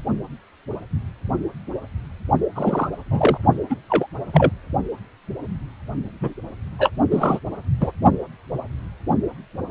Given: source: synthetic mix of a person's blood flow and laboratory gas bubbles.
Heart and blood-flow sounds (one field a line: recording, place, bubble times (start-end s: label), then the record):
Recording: Doppler ultrasound of blood flow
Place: precordium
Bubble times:
2.55-2.88 s: bubbles
3.10-3.38 s: bubbles
3.69-3.77 s: bubbles
3.90-4.07 s: bubbles
4.33-4.50 s: bubbles
6.21-6.33 s: bubbles
6.79-6.90 s: bubbles
7.11-7.40 s: bubbles
7.80-7.92 s: bubbles
From the record:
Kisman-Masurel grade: 222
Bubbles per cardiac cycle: several, 3 to 8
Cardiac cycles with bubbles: 10 to 50%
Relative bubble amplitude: moderate (0.250 to 0.450)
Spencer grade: 2 (many but less than half of the cardiac periods contain bubble signals, singularly or in groups)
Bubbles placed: only in the low amplitude regions of the cardiac cycle